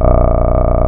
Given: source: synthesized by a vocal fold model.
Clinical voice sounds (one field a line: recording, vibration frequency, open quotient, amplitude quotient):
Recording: sustained vowel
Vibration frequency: 30 Hz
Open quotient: 0.5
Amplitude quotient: 1.2